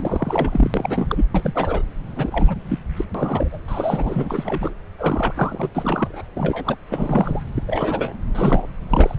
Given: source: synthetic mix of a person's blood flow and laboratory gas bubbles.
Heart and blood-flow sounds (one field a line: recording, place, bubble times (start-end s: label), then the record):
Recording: Doppler ultrasound of blood flow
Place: subclavian vein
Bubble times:
0.00-0.71 s: bubbles
0.74-1.26 s: bubbles
1.34-1.82 s: bubbles
2.15-2.55 s: bubbles
2.68-2.79 s: bubbles
2.96-3.04 s: bubbles
3.14-3.58 s: bubbles
3.68-4.74 s: bubbles
4.97-5.69 s: bubbles
5.75-6.25 s: bubbles
6.35-6.77 s: bubbles
6.89-7.42 s: bubbles
7.56-7.62 s: bubbles
7.67-8.16 s: bubbles
8.35-8.68 s: bubbles
8.90-9.15 s: bubbles
From the record:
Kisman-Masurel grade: 342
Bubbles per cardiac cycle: rolling drumbeat, 9 or more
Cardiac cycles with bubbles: 100%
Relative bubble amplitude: moderate (0.250 to 0.450)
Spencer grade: 3 (all of the cardiac periods contain showers or single bubble signals, but not dominating or overriding the cardiac motion signals)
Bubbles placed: anywhere in the cardiac cycle